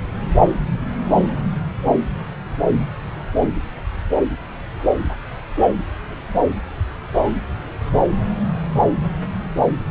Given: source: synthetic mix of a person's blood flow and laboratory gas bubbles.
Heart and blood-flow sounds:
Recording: Doppler ultrasound of blood flow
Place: subclavian vein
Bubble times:
7.14-7.31 s: bubbles
From the record:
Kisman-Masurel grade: 112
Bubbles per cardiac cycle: 1 to 2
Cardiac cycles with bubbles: 1 to 10%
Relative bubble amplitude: moderate (0.250 to 0.450)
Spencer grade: 1 (occasional bubble signal discernible with the cardiac motion signal, with majority of cardiac periods free of bubbles)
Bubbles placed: anywhere in the cardiac cycle

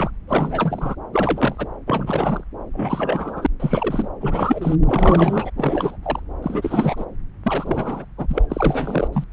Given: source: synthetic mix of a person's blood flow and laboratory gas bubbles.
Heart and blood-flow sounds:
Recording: Doppler ultrasound of blood flow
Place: subclavian vein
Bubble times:
0.00-0.10 s: bubbles
0.27-0.95 s: bubbles
1.13-1.68 s: bubbles
1.86-2.44 s: bubbles
2.72-3.47 s: bubbles
3.60-4.08 s: bubbles
4.20-4.75 s: bubbles
4.86-5.50 s: bubbles
5.57-5.96 s: bubbles
6.02-6.19 s: bubbles
6.42-7.05 s: bubbles
7.43-8.05 s: bubbles
8.17-8.46 s: bubbles
8.48-9.07 s: bubbles
9.12-9.24 s: bubbles
From the record:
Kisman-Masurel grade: 343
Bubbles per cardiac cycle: rolling drumbeat, 9 or more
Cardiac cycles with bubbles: 100%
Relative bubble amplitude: loud (0.450 to 0.775)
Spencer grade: 3 (all of the cardiac periods contain showers or single bubble signals, but not dominating or overriding the cardiac motion signals)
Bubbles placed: anywhere in the cardiac cycle

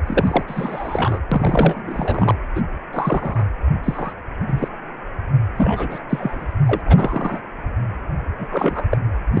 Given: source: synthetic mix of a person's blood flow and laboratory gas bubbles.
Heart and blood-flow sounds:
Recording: Doppler ultrasound of blood flow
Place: precordium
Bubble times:
0.07-0.44 s: bubbles
0.47-1.20 s: bubbles
1.31-2.34 s: bubbles
2.55-2.61 s: bubbles
2.93-3.44 s: bubbles
3.83-4.13 s: bubbles
4.46-4.68 s: bubbles
5.56-5.99 s: bubbles
6.09-6.54 s: bubbles
6.66-6.81 s: bubbles
6.86-7.39 s: bubbles
8.38-8.47 s: bubbles
8.52-8.87 s: bubbles
8.91-8.97 s: bubbles
9.34-9.40 s: bubbles
From the record:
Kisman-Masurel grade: 242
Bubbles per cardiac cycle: several, 3 to 8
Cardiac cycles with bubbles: 100%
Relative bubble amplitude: moderate (0.250 to 0.450)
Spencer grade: 3 (all of the cardiac periods contain showers or single bubble signals, but not dominating or overriding the cardiac motion signals)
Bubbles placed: anywhere in the cardiac cycle

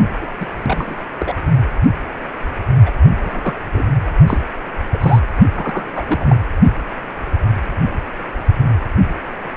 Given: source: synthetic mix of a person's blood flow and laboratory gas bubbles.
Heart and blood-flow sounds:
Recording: Doppler ultrasound of blood flow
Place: precordium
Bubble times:
0.21-0.27 s: bubbles
0.40-0.47 s: bubbles
0.67-0.95 s: bubbles
1.20-1.37 s: bubbles
2.85-2.90 s: bubbles
3.20-3.55 s: bubbles
3.72-3.85 s: bubbles
4.27-4.38 s: bubbles
4.91-4.98 s: bubbles
5.00-5.20 s: bubbles
5.54-6.03 s: bubbles
6.07-6.36 s: bubbles
From the record:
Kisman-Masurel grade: 232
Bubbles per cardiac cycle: several, 3 to 8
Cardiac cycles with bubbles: 50 to 99%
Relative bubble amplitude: moderate (0.250 to 0.450)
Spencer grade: 3 (all of the cardiac periods contain showers or single bubble signals, but not dominating or overriding the cardiac motion signals)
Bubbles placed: only in the low amplitude regions of the cardiac cycle

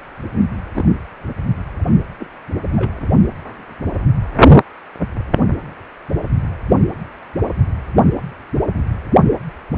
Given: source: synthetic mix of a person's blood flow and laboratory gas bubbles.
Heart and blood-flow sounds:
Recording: Doppler ultrasound of blood flow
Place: precordium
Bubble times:
0.74-0.90 s: bubbles
2.19-2.26 s: bubbles
2.76-2.97 s: bubbles
From the record:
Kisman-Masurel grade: 121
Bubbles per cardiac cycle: 1 to 2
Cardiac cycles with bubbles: 10 to 50%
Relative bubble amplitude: barely perceptible (0.100 to 0.250)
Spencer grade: 2 (many but less than half of the cardiac periods contain bubble signals, singularly or in groups)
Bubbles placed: only in the low amplitude regions of the cardiac cycle

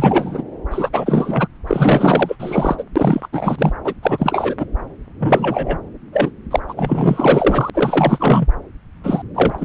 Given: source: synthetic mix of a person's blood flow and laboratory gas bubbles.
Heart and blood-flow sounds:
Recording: Doppler ultrasound of blood flow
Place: subclavian vein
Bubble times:
0.00-0.43 s: bubbles
0.70-0.89 s: bubbles
0.92-1.47 s: bubbles
1.67-2.36 s: bubbles
2.39-2.83 s: bubbles
2.96-3.28 s: bubbles
3.32-3.72 s: bubbles
3.84-3.95 s: bubbles
4.03-4.55 s: bubbles
4.58-4.66 s: bubbles
5.19-5.79 s: bubbles
6.12-6.31 s: bubbles
6.50-6.59 s: bubbles
6.68-7.70 s: bubbles
7.73-8.47 s: bubbles
9.04-9.22 s: bubbles
9.35-9.65 s: bubbles
From the record:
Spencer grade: 4 (maximum detectable bubble signal sounding continuously throughout systole and diastole of every cardiac period, and overriding the amplitude of the normal cardiac signals)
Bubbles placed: anywhere in the cardiac cycle

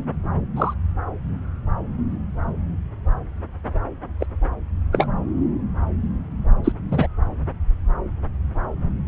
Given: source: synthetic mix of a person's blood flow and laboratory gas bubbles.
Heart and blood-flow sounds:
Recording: Doppler ultrasound of blood flow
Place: subclavian vein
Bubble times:
0.56-0.74 s: bubbles
4.20-4.26 s: bubbles
4.92-5.08 s: bubbles
6.64-6.72 s: bubbles
6.91-7.07 s: bubbles
From the record:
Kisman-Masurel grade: 123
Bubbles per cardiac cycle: 1 to 2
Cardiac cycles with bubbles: 10 to 50%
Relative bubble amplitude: loud (0.450 to 0.775)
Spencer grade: 2 (many but less than half of the cardiac periods contain bubble signals, singularly or in groups)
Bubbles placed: anywhere in the cardiac cycle

